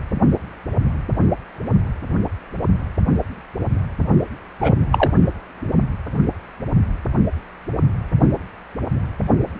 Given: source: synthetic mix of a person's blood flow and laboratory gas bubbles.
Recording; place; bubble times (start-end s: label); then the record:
Doppler ultrasound of blood flow; precordium
4.61-4.75 s: bubbles
4.92-5.11 s: bubbles
From the record:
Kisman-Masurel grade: 223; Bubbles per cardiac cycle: several, 3 to 8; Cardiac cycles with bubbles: 10 to 50%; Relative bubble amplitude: loud (0.450 to 0.775); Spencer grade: 2 (many but less than half of the cardiac periods contain bubble signals, singularly or in groups); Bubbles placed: only in the low amplitude regions of the cardiac cycle